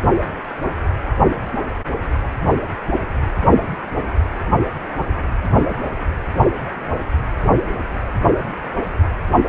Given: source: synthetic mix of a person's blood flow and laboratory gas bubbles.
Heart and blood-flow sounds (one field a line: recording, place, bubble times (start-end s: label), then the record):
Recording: Doppler ultrasound of blood flow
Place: precordium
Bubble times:
no bubbles
From the record:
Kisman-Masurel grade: 000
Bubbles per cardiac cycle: 0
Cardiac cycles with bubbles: 0%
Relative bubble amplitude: no bubbles discernible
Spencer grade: 0 (complete lack of bubble signals)